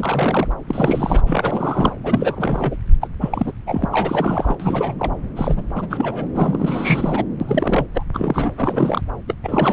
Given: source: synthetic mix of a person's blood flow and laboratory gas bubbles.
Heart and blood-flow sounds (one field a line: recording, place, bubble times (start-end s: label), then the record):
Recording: Doppler ultrasound of blood flow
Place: subclavian vein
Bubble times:
0.00-0.52 s: bubbles
0.68-1.21 s: bubbles
1.26-1.93 s: bubbles
2.03-2.75 s: bubbles
3.01-3.07 s: bubbles
3.21-3.52 s: bubbles
3.67-4.57 s: bubbles
4.60-4.94 s: bubbles
4.99-5.14 s: bubbles
5.36-5.62 s: bubbles
5.75-5.87 s: bubbles
5.90-6.27 s: bubbles
6.35-7.25 s: bubbles
7.40-7.87 s: bubbles
7.94-8.03 s: bubbles
8.13-8.51 s: bubbles
8.58-9.01 s: bubbles
9.28-9.35 s: bubbles
9.43-9.73 s: bubbles
From the record:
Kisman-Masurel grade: 332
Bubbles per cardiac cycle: rolling drumbeat, 9 or more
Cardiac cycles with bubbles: 50 to 99%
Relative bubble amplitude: moderate (0.250 to 0.450)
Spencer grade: 3 (all of the cardiac periods contain showers or single bubble signals, but not dominating or overriding the cardiac motion signals)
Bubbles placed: anywhere in the cardiac cycle